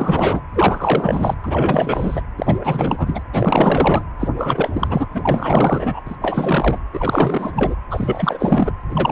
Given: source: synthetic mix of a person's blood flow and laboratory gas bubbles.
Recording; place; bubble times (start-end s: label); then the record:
Doppler ultrasound of blood flow; precordium
0.00-0.41 s: bubbles
0.54-1.34 s: bubbles
1.44-2.21 s: bubbles
2.37-2.58 s: bubbles
2.60-3.23 s: bubbles
3.33-4.03 s: bubbles
4.19-4.28 s: bubbles
4.36-5.06 s: bubbles
5.14-6.00 s: bubbles
6.06-6.15 s: bubbles
6.21-6.79 s: bubbles
6.93-7.75 s: bubbles
7.90-8.72 s: bubbles
8.89-9.12 s: bubbles
From the record:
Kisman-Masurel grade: 444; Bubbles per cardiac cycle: continuous sound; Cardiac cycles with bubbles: 100%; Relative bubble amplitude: maximal (0.775 to 0.999); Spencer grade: 4 (maximum detectable bubble signal sounding continuously throughout systole and diastole of every cardiac period, and overriding the amplitude of the normal cardiac signals); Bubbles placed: anywhere in the cardiac cycle